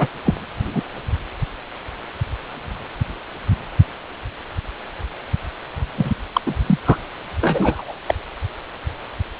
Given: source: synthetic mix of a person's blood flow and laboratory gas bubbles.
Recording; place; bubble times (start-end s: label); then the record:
Doppler ultrasound of blood flow; precordium
0.00-0.08 s: bubbles
0.24-0.34 s: bubbles
0.72-0.83 s: bubbles
5.97-6.10 s: bubbles
6.34-6.41 s: bubbles
6.46-6.54 s: bubbles
6.66-6.78 s: bubbles
6.85-6.97 s: bubbles
7.41-7.92 s: bubbles
8.06-8.14 s: bubbles
From the record:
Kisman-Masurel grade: 223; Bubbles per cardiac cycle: several, 3 to 8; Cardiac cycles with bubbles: 10 to 50%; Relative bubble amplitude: loud (0.450 to 0.775); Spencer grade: 2 (many but less than half of the cardiac periods contain bubble signals, singularly or in groups); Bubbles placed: anywhere in the cardiac cycle